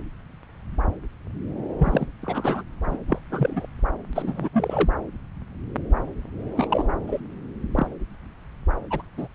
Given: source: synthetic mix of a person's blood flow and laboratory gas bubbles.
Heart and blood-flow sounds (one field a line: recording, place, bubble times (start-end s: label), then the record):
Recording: Doppler ultrasound of blood flow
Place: subclavian vein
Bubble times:
1.78-2.06 s: bubbles
2.22-2.63 s: bubbles
2.86-2.97 s: bubbles
3.07-3.19 s: bubbles
3.29-3.67 s: bubbles
4.13-4.49 s: bubbles
4.53-4.90 s: bubbles
6.57-6.68 s: bubbles
6.70-6.84 s: bubbles
7.07-7.21 s: bubbles
7.72-7.87 s: bubbles
8.90-9.02 s: bubbles
9.18-9.28 s: bubbles
From the record:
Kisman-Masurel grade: 232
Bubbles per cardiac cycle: several, 3 to 8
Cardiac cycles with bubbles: 50 to 99%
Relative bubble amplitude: moderate (0.250 to 0.450)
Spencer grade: 3 (all of the cardiac periods contain showers or single bubble signals, but not dominating or overriding the cardiac motion signals)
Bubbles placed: anywhere in the cardiac cycle